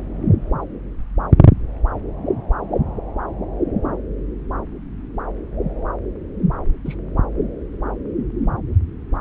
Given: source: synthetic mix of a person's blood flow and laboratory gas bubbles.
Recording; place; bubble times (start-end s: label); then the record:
Doppler ultrasound of blood flow; subclavian vein
6.85-6.96 s: bubbles
From the record:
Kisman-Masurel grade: 111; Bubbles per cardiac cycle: 1 to 2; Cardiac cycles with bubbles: 1 to 10%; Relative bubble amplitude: barely perceptible (0.100 to 0.250); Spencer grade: 1 (occasional bubble signal discernible with the cardiac motion signal, with majority of cardiac periods free of bubbles); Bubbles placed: anywhere in the cardiac cycle